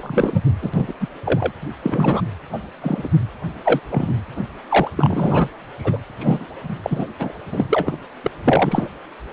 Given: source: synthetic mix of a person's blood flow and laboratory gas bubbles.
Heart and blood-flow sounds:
Doppler ultrasound of blood flow; precordium
0.00-0.40 s: bubbles
0.61-0.71 s: bubbles
0.73-0.94 s: bubbles
1.00-1.09 s: bubbles
1.24-1.52 s: bubbles
1.83-2.22 s: bubbles
2.52-2.59 s: bubbles
2.81-3.08 s: bubbles
3.64-3.79 s: bubbles
3.90-4.17 s: bubbles
4.69-4.88 s: bubbles
4.96-5.49 s: bubbles
5.79-5.99 s: bubbles
6.19-6.46 s: bubbles
6.68-6.76 s: bubbles
6.83-7.08 s: bubbles
7.19-7.33 s: bubbles
7.51-7.66 s: bubbles
7.69-7.98 s: bubbles
8.23-8.31 s: bubbles
8.44-8.90 s: bubbles
From the record:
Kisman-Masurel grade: 243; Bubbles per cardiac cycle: several, 3 to 8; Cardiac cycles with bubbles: 100%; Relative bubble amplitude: loud (0.450 to 0.775); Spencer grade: 3 (all of the cardiac periods contain showers or single bubble signals, but not dominating or overriding the cardiac motion signals); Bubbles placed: anywhere in the cardiac cycle

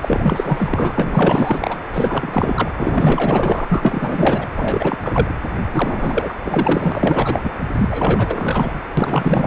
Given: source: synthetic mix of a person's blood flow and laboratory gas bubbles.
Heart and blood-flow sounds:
Doppler ultrasound of blood flow; precordium
0.01-1.79 s: bubbles
1.93-2.71 s: bubbles
2.76-4.47 s: bubbles
4.56-4.98 s: bubbles
5.04-5.35 s: bubbles
5.73-6.35 s: bubbles
6.43-7.52 s: bubbles
7.78-8.81 s: bubbles
8.97-9.47 s: bubbles
From the record:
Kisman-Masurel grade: 444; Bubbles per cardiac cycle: continuous sound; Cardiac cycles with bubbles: 100%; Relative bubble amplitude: maximal (0.775 to 0.999); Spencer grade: 4 (maximum detectable bubble signal sounding continuously throughout systole and diastole of every cardiac period, and overriding the amplitude of the normal cardiac signals); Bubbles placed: anywhere in the cardiac cycle

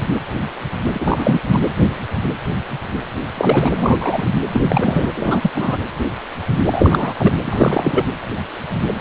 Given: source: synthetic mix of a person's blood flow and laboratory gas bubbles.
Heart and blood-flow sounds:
Doppler ultrasound of blood flow; precordium
0.94-1.41 s: bubbles
1.48-1.61 s: bubbles
3.34-3.72 s: bubbles
3.78-4.26 s: bubbles
4.53-4.61 s: bubbles
4.69-5.09 s: bubbles
5.17-5.50 s: bubbles
5.54-5.77 s: bubbles
6.67-7.13 s: bubbles
7.18-7.33 s: bubbles
7.45-8.05 s: bubbles
From the record:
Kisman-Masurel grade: 333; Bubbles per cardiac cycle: rolling drumbeat, 9 or more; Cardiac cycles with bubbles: 50 to 99%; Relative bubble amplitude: loud (0.450 to 0.775); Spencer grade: 3 (all of the cardiac periods contain showers or single bubble signals, but not dominating or overriding the cardiac motion signals); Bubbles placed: anywhere in the cardiac cycle

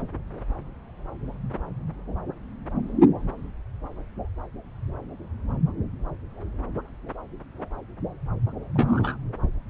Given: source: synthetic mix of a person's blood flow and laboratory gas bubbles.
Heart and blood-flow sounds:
Doppler ultrasound of blood flow; subclavian vein
8.74-9.17 s: bubbles
From the record:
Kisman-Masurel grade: 112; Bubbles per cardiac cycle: 1 to 2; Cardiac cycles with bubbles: 1 to 10%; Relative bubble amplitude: moderate (0.250 to 0.450); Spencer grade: 1 (occasional bubble signal discernible with the cardiac motion signal, with majority of cardiac periods free of bubbles); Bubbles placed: anywhere in the cardiac cycle

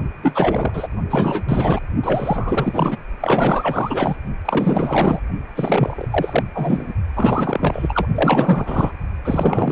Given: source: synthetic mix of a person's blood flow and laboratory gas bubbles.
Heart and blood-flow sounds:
Doppler ultrasound of blood flow; precordium
0.22-0.88 s: bubbles
1.10-1.79 s: bubbles
2.03-2.97 s: bubbles
3.20-4.17 s: bubbles
4.45-5.21 s: bubbles
5.55-6.08 s: bubbles
6.11-6.43 s: bubbles
6.54-6.94 s: bubbles
7.15-8.09 s: bubbles
8.14-8.92 s: bubbles
9.25-9.72 s: bubbles
From the record:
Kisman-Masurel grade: 444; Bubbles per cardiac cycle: continuous sound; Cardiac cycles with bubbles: 100%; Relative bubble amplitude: maximal (0.775 to 0.999); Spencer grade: 4 (maximum detectable bubble signal sounding continuously throughout systole and diastole of every cardiac period, and overriding the amplitude of the normal cardiac signals); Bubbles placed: only in the low amplitude regions of the cardiac cycle

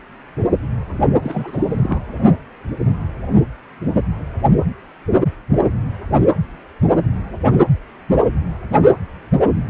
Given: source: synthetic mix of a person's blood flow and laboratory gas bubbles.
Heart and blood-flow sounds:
Doppler ultrasound of blood flow; precordium
1.22-2.06 s: bubbles
From the record:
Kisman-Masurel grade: 212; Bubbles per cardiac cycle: several, 3 to 8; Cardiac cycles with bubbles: 1 to 10%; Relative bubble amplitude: moderate (0.250 to 0.450); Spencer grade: 1 (occasional bubble signal discernible with the cardiac motion signal, with majority of cardiac periods free of bubbles); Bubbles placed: only in the low amplitude regions of the cardiac cycle

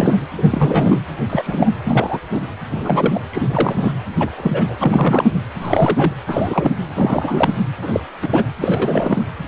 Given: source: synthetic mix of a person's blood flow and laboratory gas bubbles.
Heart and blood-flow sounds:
Doppler ultrasound of blood flow; precordium
0.00-0.17 s: bubbles
0.38-1.02 s: bubbles
1.29-1.69 s: bubbles
1.83-2.19 s: bubbles
2.33-2.40 s: bubbles
2.71-3.21 s: bubbles
3.30-3.92 s: bubbles
4.19-4.29 s: bubbles
4.37-4.76 s: bubbles
4.80-5.30 s: bubbles
5.62-6.13 s: bubbles
6.26-6.76 s: bubbles
6.95-7.57 s: bubbles
7.82-8.00 s: bubbles
8.22-8.44 s: bubbles
8.61-9.23 s: bubbles
From the record:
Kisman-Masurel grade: 243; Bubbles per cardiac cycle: several, 3 to 8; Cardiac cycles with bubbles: 100%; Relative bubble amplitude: loud (0.450 to 0.775); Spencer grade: 3 (all of the cardiac periods contain showers or single bubble signals, but not dominating or overriding the cardiac motion signals); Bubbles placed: anywhere in the cardiac cycle

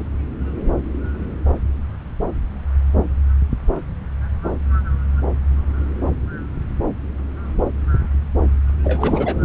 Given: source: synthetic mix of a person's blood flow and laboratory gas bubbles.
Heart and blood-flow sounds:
Doppler ultrasound of blood flow; subclavian vein
8.84-9.35 s: bubbles
9.41-9.44 s: bubbles
From the record:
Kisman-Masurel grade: 212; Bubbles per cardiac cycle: several, 3 to 8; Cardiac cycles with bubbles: 1 to 10%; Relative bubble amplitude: moderate (0.250 to 0.450); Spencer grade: 1 (occasional bubble signal discernible with the cardiac motion signal, with majority of cardiac periods free of bubbles); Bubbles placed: anywhere in the cardiac cycle

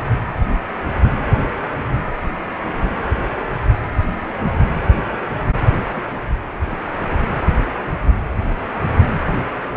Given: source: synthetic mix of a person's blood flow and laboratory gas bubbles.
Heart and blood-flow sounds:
Doppler ultrasound of blood flow; precordium
5.93-6.03 s: bubbles
6.52-6.55 s: bubbles
From the record:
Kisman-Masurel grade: 111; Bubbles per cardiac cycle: 1 to 2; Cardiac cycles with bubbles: 1 to 10%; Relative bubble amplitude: barely perceptible (0.100 to 0.250); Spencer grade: 1 (occasional bubble signal discernible with the cardiac motion signal, with majority of cardiac periods free of bubbles); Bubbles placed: anywhere in the cardiac cycle

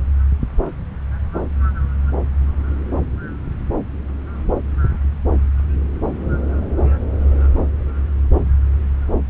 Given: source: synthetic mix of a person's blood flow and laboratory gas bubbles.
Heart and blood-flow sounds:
Doppler ultrasound of blood flow; subclavian vein
no bubbles
From the record:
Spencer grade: 0 (complete lack of bubble signals)

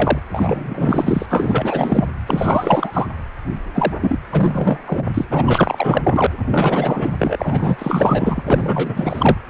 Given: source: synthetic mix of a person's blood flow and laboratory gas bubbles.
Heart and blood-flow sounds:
Doppler ultrasound of blood flow; precordium
0.00-0.19 s: bubbles
0.31-1.26 s: bubbles
1.29-2.07 s: bubbles
2.27-3.08 s: bubbles
3.73-3.93 s: bubbles
4.01-4.18 s: bubbles
4.32-4.79 s: bubbles
4.86-5.05 s: bubbles
5.14-5.25 s: bubbles
5.29-6.26 s: bubbles
6.44-7.15 s: bubbles
7.18-8.42 s: bubbles
8.46-9.38 s: bubbles
From the record:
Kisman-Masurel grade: 444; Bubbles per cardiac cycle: continuous sound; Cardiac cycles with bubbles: 100%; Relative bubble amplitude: maximal (0.775 to 0.999); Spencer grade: 4 (maximum detectable bubble signal sounding continuously throughout systole and diastole of every cardiac period, and overriding the amplitude of the normal cardiac signals); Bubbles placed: anywhere in the cardiac cycle

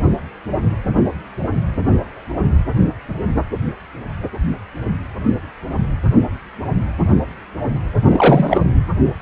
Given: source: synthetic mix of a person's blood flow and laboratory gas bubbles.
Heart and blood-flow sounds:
Doppler ultrasound of blood flow; precordium
8.03-8.61 s: bubbles
From the record:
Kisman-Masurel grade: 213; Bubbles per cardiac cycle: several, 3 to 8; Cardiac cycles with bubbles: 1 to 10%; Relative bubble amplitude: loud (0.450 to 0.775); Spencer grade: 1 (occasional bubble signal discernible with the cardiac motion signal, with majority of cardiac periods free of bubbles); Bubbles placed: anywhere in the cardiac cycle

